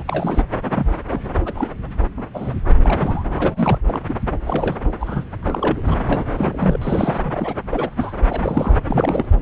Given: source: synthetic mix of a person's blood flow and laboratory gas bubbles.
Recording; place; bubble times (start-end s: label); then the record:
Doppler ultrasound of blood flow; subclavian vein
0.00-0.02 s: bubbles
0.07-0.43 s: bubbles
0.65-0.69 s: bubbles
0.76-0.86 s: bubbles
1.10-1.21 s: bubbles
1.45-1.70 s: bubbles
2.17-2.27 s: bubbles
2.33-2.54 s: bubbles
2.76-3.24 s: bubbles
3.35-3.78 s: bubbles
3.85-4.00 s: bubbles
4.08-4.15 s: bubbles
4.44-4.76 s: bubbles
5.00-5.26 s: bubbles
5.42-5.82 s: bubbles
5.85-6.24 s: bubbles
6.31-6.77 s: bubbles
6.81-7.18 s: bubbles
7.24-7.54 s: bubbles
7.70-7.89 s: bubbles
7.96-8.13 s: bubbles
8.29-8.75 s: bubbles
8.84-9.25 s: bubbles
From the record:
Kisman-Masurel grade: 242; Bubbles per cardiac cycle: several, 3 to 8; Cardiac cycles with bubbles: 100%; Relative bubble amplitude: moderate (0.250 to 0.450); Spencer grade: 3 (all of the cardiac periods contain showers or single bubble signals, but not dominating or overriding the cardiac motion signals); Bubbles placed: anywhere in the cardiac cycle